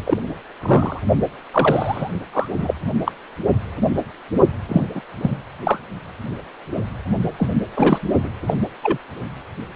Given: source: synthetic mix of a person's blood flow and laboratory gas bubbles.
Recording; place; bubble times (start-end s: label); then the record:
Doppler ultrasound of blood flow; precordium
0.06-0.20 s: bubbles
0.60-1.02 s: bubbles
1.52-2.09 s: bubbles
2.33-2.46 s: bubbles
2.58-2.74 s: bubbles
3.06-3.11 s: bubbles
4.68-4.87 s: bubbles
4.95-5.02 s: bubbles
5.21-5.38 s: bubbles
5.63-5.81 s: bubbles
7.38-7.49 s: bubbles
7.76-7.99 s: bubbles
8.24-8.30 s: bubbles
8.47-8.54 s: bubbles
8.83-8.98 s: bubbles
From the record:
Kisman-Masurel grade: 222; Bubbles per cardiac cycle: several, 3 to 8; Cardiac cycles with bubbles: 10 to 50%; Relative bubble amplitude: moderate (0.250 to 0.450); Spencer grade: 2 (many but less than half of the cardiac periods contain bubble signals, singularly or in groups); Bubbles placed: only in the low amplitude regions of the cardiac cycle